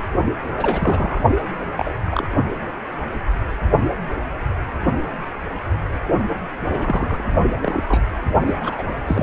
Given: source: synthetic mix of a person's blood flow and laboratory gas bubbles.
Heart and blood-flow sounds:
Doppler ultrasound of blood flow; precordium
0.48-0.52 s: bubbles
0.57-1.21 s: bubbles
1.77-1.94 s: bubbles
2.11-2.29 s: bubbles
6.70-7.24 s: bubbles
7.62-7.82 s: bubbles
7.88-8.06 s: bubbles
8.42-8.57 s: bubbles
8.60-8.83 s: bubbles
9.06-9.23 s: bubbles
From the record:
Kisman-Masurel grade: 232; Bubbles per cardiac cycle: several, 3 to 8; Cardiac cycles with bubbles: 50 to 99%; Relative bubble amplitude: moderate (0.250 to 0.450); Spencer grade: 3 (all of the cardiac periods contain showers or single bubble signals, but not dominating or overriding the cardiac motion signals); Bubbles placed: only in the low amplitude regions of the cardiac cycle

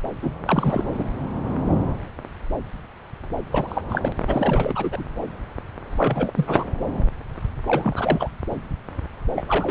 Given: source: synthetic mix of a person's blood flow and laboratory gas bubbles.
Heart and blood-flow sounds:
Doppler ultrasound of blood flow; subclavian vein
0.22-0.31 s: bubbles
0.45-0.84 s: bubbles
0.94-1.04 s: bubbles
3.52-3.81 s: bubbles
3.90-4.12 s: bubbles
4.27-5.04 s: bubbles
5.97-6.33 s: bubbles
6.36-6.64 s: bubbles
7.66-8.29 s: bubbles
9.35-9.45 s: bubbles
9.48-9.71 s: bubbles
From the record:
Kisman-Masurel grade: 332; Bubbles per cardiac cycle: rolling drumbeat, 9 or more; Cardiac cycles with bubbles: 50 to 99%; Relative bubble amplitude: moderate (0.250 to 0.450); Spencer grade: 3 (all of the cardiac periods contain showers or single bubble signals, but not dominating or overriding the cardiac motion signals); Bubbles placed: anywhere in the cardiac cycle

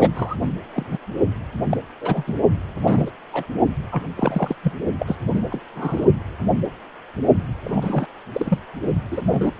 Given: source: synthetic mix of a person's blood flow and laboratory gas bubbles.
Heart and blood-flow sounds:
Doppler ultrasound of blood flow; precordium
0.00-0.10 s: bubbles
0.15-0.35 s: bubbles
0.41-0.46 s: bubbles
0.73-0.98 s: bubbles
1.70-1.77 s: bubbles
2.00-2.23 s: bubbles
2.27-2.35 s: bubbles
2.80-3.10 s: bubbles
3.33-3.44 s: bubbles
3.92-4.03 s: bubbles
4.16-4.55 s: bubbles
4.63-4.72 s: bubbles
4.99-5.16 s: bubbles
5.30-5.40 s: bubbles
5.50-5.61 s: bubbles
5.75-6.06 s: bubbles
7.64-8.06 s: bubbles
8.32-8.59 s: bubbles
9.11-9.21 s: bubbles
9.30-9.52 s: bubbles
From the record:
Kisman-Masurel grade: 232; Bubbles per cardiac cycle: several, 3 to 8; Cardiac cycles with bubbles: 50 to 99%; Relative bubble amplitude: moderate (0.250 to 0.450); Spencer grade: 3 (all of the cardiac periods contain showers or single bubble signals, but not dominating or overriding the cardiac motion signals); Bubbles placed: only in the low amplitude regions of the cardiac cycle

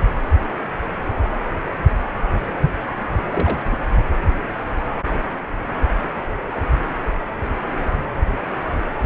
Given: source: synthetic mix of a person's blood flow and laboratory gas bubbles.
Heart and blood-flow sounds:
Doppler ultrasound of blood flow; precordium
3.31-3.63 s: bubbles
3.70-3.77 s: bubbles
From the record:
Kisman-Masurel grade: 211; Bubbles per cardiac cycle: several, 3 to 8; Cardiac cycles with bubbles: 1 to 10%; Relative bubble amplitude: barely perceptible (0.100 to 0.250); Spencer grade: 1 (occasional bubble signal discernible with the cardiac motion signal, with majority of cardiac periods free of bubbles); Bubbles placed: anywhere in the cardiac cycle

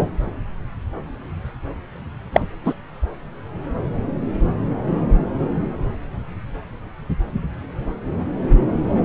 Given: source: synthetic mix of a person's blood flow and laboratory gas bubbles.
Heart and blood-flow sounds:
Doppler ultrasound of blood flow; subclavian vein
2.32-2.40 s: bubbles
2.65-2.74 s: bubbles
From the record:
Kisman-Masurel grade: 113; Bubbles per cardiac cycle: 1 to 2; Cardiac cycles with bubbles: 1 to 10%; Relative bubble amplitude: loud (0.450 to 0.775); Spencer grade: 1 (occasional bubble signal discernible with the cardiac motion signal, with majority of cardiac periods free of bubbles); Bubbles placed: anywhere in the cardiac cycle

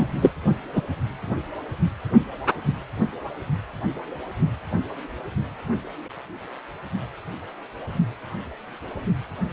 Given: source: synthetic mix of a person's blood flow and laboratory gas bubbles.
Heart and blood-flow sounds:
Doppler ultrasound of blood flow; precordium
0.00-0.31 s: bubbles
0.75-0.81 s: bubbles
From the record:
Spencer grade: 1 (occasional bubble signal discernible with the cardiac motion signal, with majority of cardiac periods free of bubbles); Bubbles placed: only in the low amplitude regions of the cardiac cycle

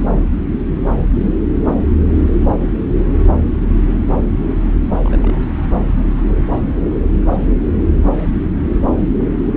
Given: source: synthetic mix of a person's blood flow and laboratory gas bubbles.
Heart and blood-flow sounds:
Doppler ultrasound of blood flow; subclavian vein
0.95-1.00 s: bubbles
1.12-1.38 s: bubbles
1.86-1.95 s: bubbles
5.05-5.41 s: bubbles
From the record:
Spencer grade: 2 (many but less than half of the cardiac periods contain bubble signals, singularly or in groups); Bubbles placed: anywhere in the cardiac cycle

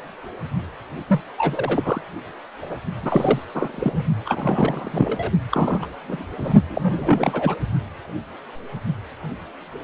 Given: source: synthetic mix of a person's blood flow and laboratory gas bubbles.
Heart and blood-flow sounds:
Doppler ultrasound of blood flow; precordium
1.08-1.21 s: bubbles
1.38-2.01 s: bubbles
2.62-2.77 s: bubbles
3.03-3.45 s: bubbles
3.54-4.04 s: bubbles
4.25-5.31 s: bubbles
5.51-5.89 s: bubbles
6.08-6.25 s: bubbles
6.38-6.54 s: bubbles
6.68-7.55 s: bubbles
From the record:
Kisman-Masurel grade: 332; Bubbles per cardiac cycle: rolling drumbeat, 9 or more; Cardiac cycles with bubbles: 50 to 99%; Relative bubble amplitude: moderate (0.250 to 0.450); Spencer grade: 3 (all of the cardiac periods contain showers or single bubble signals, but not dominating or overriding the cardiac motion signals); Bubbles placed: only in the low amplitude regions of the cardiac cycle

